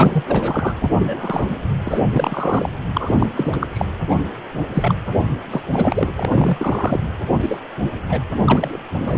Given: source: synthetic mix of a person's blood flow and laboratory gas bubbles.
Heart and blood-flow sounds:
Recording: Doppler ultrasound of blood flow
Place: precordium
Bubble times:
0.00-0.24 s: bubbles
0.28-0.73 s: bubbles
0.81-0.90 s: bubbles
0.98-1.57 s: bubbles
1.85-2.72 s: bubbles
2.93-3.15 s: bubbles
3.19-3.29 s: bubbles
3.35-3.56 s: bubbles
3.59-3.67 s: bubbles
3.73-3.85 s: bubbles
4.10-4.16 s: bubbles
4.73-4.94 s: bubbles
5.50-5.61 s: bubbles
5.70-6.11 s: bubbles
6.15-7.00 s: bubbles
7.40-7.58 s: bubbles
7.79-7.88 s: bubbles
8.09-8.20 s: bubbles
8.40-8.78 s: bubbles
9.02-9.18 s: bubbles
From the record:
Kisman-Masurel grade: 243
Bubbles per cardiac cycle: several, 3 to 8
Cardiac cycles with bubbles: 100%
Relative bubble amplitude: loud (0.450 to 0.775)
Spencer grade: 3 (all of the cardiac periods contain showers or single bubble signals, but not dominating or overriding the cardiac motion signals)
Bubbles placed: anywhere in the cardiac cycle

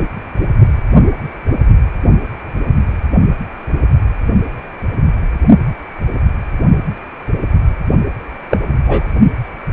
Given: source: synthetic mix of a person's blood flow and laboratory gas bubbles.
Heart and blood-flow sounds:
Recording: Doppler ultrasound of blood flow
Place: precordium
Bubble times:
8.51-8.57 s: bubbles
8.87-9.07 s: bubbles
From the record:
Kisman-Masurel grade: 113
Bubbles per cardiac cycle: 1 to 2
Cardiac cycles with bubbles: 1 to 10%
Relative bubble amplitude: loud (0.450 to 0.775)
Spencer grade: 1 (occasional bubble signal discernible with the cardiac motion signal, with majority of cardiac periods free of bubbles)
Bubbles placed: only in the low amplitude regions of the cardiac cycle

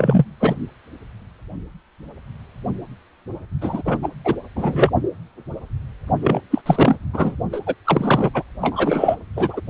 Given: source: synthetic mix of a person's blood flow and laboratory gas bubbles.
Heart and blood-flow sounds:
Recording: Doppler ultrasound of blood flow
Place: precordium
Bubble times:
0.00-0.25 s: bubbles
0.40-0.55 s: bubbles
3.61-3.98 s: bubbles
4.02-4.09 s: bubbles
4.24-4.34 s: bubbles
4.55-4.92 s: bubbles
6.22-6.40 s: bubbles
6.50-6.61 s: bubbles
6.65-6.98 s: bubbles
7.13-7.35 s: bubbles
7.52-7.60 s: bubbles
7.66-7.74 s: bubbles
7.84-8.30 s: bubbles
8.33-8.42 s: bubbles
8.61-9.16 s: bubbles
9.36-9.61 s: bubbles
From the record:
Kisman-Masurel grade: 333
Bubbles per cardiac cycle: rolling drumbeat, 9 or more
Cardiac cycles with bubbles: 50 to 99%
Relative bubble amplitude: loud (0.450 to 0.775)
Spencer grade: 3 (all of the cardiac periods contain showers or single bubble signals, but not dominating or overriding the cardiac motion signals)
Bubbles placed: only in the low amplitude regions of the cardiac cycle

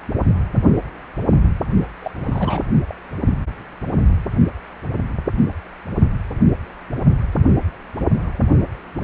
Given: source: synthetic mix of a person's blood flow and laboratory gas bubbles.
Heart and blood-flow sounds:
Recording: Doppler ultrasound of blood flow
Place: precordium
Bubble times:
2.02-2.11 s: bubbles
2.23-2.62 s: bubbles
2.88-2.93 s: bubbles
From the record:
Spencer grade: 1 (occasional bubble signal discernible with the cardiac motion signal, with majority of cardiac periods free of bubbles)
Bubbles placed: only in the low amplitude regions of the cardiac cycle

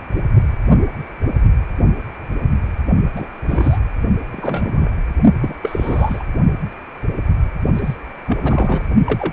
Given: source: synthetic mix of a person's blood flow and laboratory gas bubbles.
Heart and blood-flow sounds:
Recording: Doppler ultrasound of blood flow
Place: precordium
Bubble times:
3.16-3.27 s: bubbles
3.48-3.79 s: bubbles
4.31-4.90 s: bubbles
5.40-5.55 s: bubbles
5.62-6.24 s: bubbles
7.75-7.96 s: bubbles
8.27-8.38 s: bubbles
8.40-8.81 s: bubbles
9.05-9.33 s: bubbles
From the record:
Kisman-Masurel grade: 232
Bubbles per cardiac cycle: several, 3 to 8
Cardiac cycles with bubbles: 50 to 99%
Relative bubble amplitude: moderate (0.250 to 0.450)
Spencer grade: 3 (all of the cardiac periods contain showers or single bubble signals, but not dominating or overriding the cardiac motion signals)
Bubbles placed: only in the low amplitude regions of the cardiac cycle

